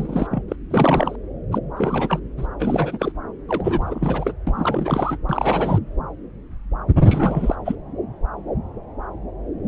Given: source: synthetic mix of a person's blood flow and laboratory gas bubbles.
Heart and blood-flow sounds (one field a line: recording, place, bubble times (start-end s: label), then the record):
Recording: Doppler ultrasound of blood flow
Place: subclavian vein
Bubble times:
0.00-0.27 s: bubbles
0.31-0.42 s: bubbles
0.48-0.55 s: bubbles
0.70-1.16 s: bubbles
1.52-1.58 s: bubbles
1.77-2.19 s: bubbles
2.37-2.46 s: bubbles
2.59-3.12 s: bubbles
3.48-4.32 s: bubbles
4.46-5.17 s: bubbles
5.29-5.78 s: bubbles
7.00-7.55 s: bubbles
7.65-7.75 s: bubbles
From the record:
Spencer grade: 3 (all of the cardiac periods contain showers or single bubble signals, but not dominating or overriding the cardiac motion signals)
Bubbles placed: anywhere in the cardiac cycle